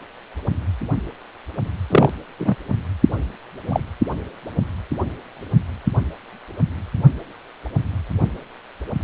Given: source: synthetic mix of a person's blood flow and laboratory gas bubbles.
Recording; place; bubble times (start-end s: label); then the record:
Doppler ultrasound of blood flow; precordium
1.90-2.10 s: bubbles
2.38-2.55 s: bubbles
3.70-3.81 s: bubbles
From the record:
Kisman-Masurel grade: 123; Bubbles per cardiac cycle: 1 to 2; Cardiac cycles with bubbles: 10 to 50%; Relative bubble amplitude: loud (0.450 to 0.775); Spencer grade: 2 (many but less than half of the cardiac periods contain bubble signals, singularly or in groups); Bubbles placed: only in the low amplitude regions of the cardiac cycle